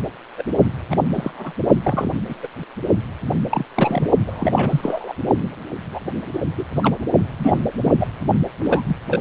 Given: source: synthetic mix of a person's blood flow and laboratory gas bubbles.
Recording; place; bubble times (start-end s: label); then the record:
Doppler ultrasound of blood flow; precordium
0.37-0.43 s: bubbles
0.91-0.96 s: bubbles
1.15-1.52 s: bubbles
1.83-2.12 s: bubbles
2.29-2.36 s: bubbles
2.42-2.48 s: bubbles
3.50-3.66 s: bubbles
3.76-4.09 s: bubbles
4.26-4.52 s: bubbles
4.54-5.12 s: bubbles
5.92-6.00 s: bubbles
6.33-6.40 s: bubbles
6.57-6.65 s: bubbles
6.75-6.95 s: bubbles
7.39-7.59 s: bubbles
7.62-7.92 s: bubbles
8.00-8.07 s: bubbles
8.60-8.83 s: bubbles
8.88-8.96 s: bubbles
9.08-9.21 s: bubbles
From the record:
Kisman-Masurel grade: 242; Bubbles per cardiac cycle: several, 3 to 8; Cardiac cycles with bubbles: 100%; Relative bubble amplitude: moderate (0.250 to 0.450); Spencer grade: 3 (all of the cardiac periods contain showers or single bubble signals, but not dominating or overriding the cardiac motion signals); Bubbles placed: only in the low amplitude regions of the cardiac cycle